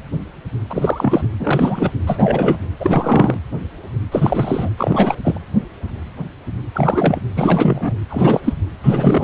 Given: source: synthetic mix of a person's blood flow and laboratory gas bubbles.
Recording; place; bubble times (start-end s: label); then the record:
Doppler ultrasound of blood flow; precordium
0.69-1.27 s: bubbles
1.39-1.92 s: bubbles
2.06-2.57 s: bubbles
2.79-3.38 s: bubbles
4.12-4.70 s: bubbles
4.77-5.16 s: bubbles
5.24-5.39 s: bubbles
6.74-7.22 s: bubbles
7.36-7.94 s: bubbles
8.08-8.53 s: bubbles
8.83-9.24 s: bubbles
From the record:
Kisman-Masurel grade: 333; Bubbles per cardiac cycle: rolling drumbeat, 9 or more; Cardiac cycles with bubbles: 50 to 99%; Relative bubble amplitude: loud (0.450 to 0.775); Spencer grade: 3 (all of the cardiac periods contain showers or single bubble signals, but not dominating or overriding the cardiac motion signals); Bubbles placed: anywhere in the cardiac cycle